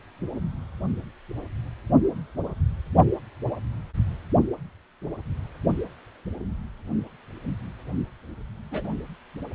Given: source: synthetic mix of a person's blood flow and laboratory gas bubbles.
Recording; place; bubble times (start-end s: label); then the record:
Doppler ultrasound of blood flow; precordium
8.71-8.95 s: bubbles
From the record:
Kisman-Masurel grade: 111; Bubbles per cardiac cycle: 1 to 2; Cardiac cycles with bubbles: 1 to 10%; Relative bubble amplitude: barely perceptible (0.100 to 0.250); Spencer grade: 1 (occasional bubble signal discernible with the cardiac motion signal, with majority of cardiac periods free of bubbles); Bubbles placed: only in the low amplitude regions of the cardiac cycle